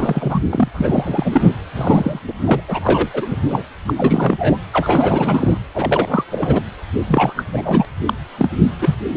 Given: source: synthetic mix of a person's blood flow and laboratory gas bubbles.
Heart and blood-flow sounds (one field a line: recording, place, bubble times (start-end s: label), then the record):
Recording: Doppler ultrasound of blood flow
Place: precordium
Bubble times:
0.00-0.43 s: bubbles
0.49-0.68 s: bubbles
0.74-1.50 s: bubbles
1.76-2.20 s: bubbles
2.28-2.33 s: bubbles
2.39-2.61 s: bubbles
2.68-3.08 s: bubbles
3.13-3.26 s: bubbles
3.29-3.38 s: bubbles
3.49-3.63 s: bubbles
3.86-3.94 s: bubbles
3.96-4.58 s: bubbles
4.73-5.58 s: bubbles
5.74-6.25 s: bubbles
6.32-6.62 s: bubbles
7.07-7.33 s: bubbles
7.36-7.45 s: bubbles
7.52-7.86 s: bubbles
8.05-8.13 s: bubbles
8.38-8.49 s: bubbles
8.79-8.95 s: bubbles
9.12-9.17 s: bubbles
From the record:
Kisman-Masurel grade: 343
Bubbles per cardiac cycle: rolling drumbeat, 9 or more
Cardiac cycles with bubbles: 100%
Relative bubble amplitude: loud (0.450 to 0.775)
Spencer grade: 3 (all of the cardiac periods contain showers or single bubble signals, but not dominating or overriding the cardiac motion signals)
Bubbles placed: anywhere in the cardiac cycle